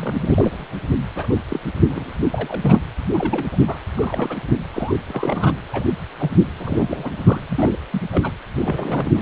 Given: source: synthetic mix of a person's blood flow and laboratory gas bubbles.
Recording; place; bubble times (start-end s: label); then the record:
Doppler ultrasound of blood flow; precordium
0.00-0.67 s: bubbles
1.16-1.34 s: bubbles
1.50-1.60 s: bubbles
1.85-2.14 s: bubbles
2.33-2.80 s: bubbles
3.12-3.46 s: bubbles
3.52-3.57 s: bubbles
3.67-3.78 s: bubbles
3.95-4.41 s: bubbles
4.73-4.95 s: bubbles
5.06-5.53 s: bubbles
5.72-5.86 s: bubbles
6.20-6.30 s: bubbles
6.58-7.40 s: bubbles
7.49-7.77 s: bubbles
7.92-8.03 s: bubbles
8.12-8.31 s: bubbles
8.58-9.22 s: bubbles
From the record:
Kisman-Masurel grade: 242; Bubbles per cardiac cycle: several, 3 to 8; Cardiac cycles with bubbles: 100%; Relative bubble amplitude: moderate (0.250 to 0.450); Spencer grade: 3 (all of the cardiac periods contain showers or single bubble signals, but not dominating or overriding the cardiac motion signals); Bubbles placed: anywhere in the cardiac cycle